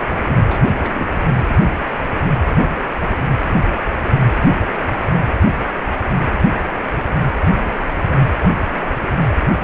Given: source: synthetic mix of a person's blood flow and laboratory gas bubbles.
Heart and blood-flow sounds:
Doppler ultrasound of blood flow; precordium
0.46-0.60 s: bubbles
0.77-1.07 s: bubbles
From the record:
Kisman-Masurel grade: 211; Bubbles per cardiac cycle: several, 3 to 8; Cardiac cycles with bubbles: 1 to 10%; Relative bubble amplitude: barely perceptible (0.100 to 0.250); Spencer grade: 1 (occasional bubble signal discernible with the cardiac motion signal, with majority of cardiac periods free of bubbles); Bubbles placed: anywhere in the cardiac cycle

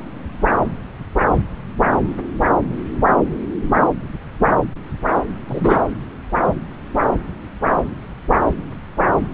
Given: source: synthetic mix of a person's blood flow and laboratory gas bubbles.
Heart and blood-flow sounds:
Doppler ultrasound of blood flow; subclavian vein
5.47-5.82 s: bubbles
From the record:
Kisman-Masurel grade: 113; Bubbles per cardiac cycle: 1 to 2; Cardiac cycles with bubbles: 1 to 10%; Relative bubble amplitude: loud (0.450 to 0.775); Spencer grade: 1 (occasional bubble signal discernible with the cardiac motion signal, with majority of cardiac periods free of bubbles); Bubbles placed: anywhere in the cardiac cycle

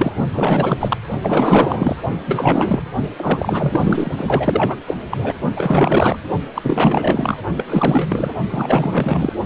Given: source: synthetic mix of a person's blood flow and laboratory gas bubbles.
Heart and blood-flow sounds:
Doppler ultrasound of blood flow; precordium
0.00-0.12 s: bubbles
0.33-0.96 s: bubbles
1.22-1.96 s: bubbles
2.26-2.83 s: bubbles
3.17-4.10 s: bubbles
4.17-4.75 s: bubbles
4.87-4.95 s: bubbles
5.11-5.17 s: bubbles
5.23-5.36 s: bubbles
5.56-6.17 s: bubbles
6.54-7.38 s: bubbles
7.58-7.65 s: bubbles
7.67-8.30 s: bubbles
8.48-9.33 s: bubbles
From the record:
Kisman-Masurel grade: 444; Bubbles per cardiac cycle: continuous sound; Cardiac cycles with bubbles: 100%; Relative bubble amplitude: maximal (0.775 to 0.999); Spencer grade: 4 (maximum detectable bubble signal sounding continuously throughout systole and diastole of every cardiac period, and overriding the amplitude of the normal cardiac signals); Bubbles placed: only in the low amplitude regions of the cardiac cycle

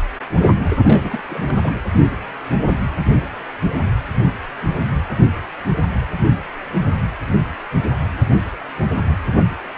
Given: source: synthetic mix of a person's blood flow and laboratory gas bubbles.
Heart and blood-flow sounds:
Doppler ultrasound of blood flow; precordium
0.78-1.21 s: bubbles
1.29-1.73 s: bubbles
From the record:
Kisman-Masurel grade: 211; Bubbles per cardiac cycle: several, 3 to 8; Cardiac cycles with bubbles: 1 to 10%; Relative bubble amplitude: barely perceptible (0.100 to 0.250); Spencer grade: 1 (occasional bubble signal discernible with the cardiac motion signal, with majority of cardiac periods free of bubbles); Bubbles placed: anywhere in the cardiac cycle

